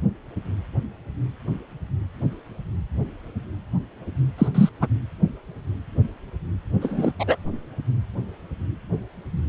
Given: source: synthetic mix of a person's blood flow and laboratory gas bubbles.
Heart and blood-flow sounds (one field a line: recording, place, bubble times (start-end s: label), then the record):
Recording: Doppler ultrasound of blood flow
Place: precordium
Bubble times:
4.38-4.48 s: bubbles
4.54-4.69 s: bubbles
4.81-4.88 s: bubbles
6.80-7.12 s: bubbles
7.19-7.37 s: bubbles
From the record:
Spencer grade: 2 (many but less than half of the cardiac periods contain bubble signals, singularly or in groups)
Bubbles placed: anywhere in the cardiac cycle